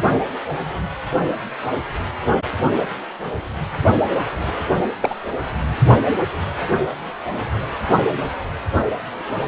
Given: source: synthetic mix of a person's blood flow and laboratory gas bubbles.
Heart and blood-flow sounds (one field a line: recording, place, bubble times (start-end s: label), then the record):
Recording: Doppler ultrasound of blood flow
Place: precordium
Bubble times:
5.01-5.15 s: bubbles
From the record:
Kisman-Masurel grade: 112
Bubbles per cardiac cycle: 1 to 2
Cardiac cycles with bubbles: 1 to 10%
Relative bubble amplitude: moderate (0.250 to 0.450)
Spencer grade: 1 (occasional bubble signal discernible with the cardiac motion signal, with majority of cardiac periods free of bubbles)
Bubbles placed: anywhere in the cardiac cycle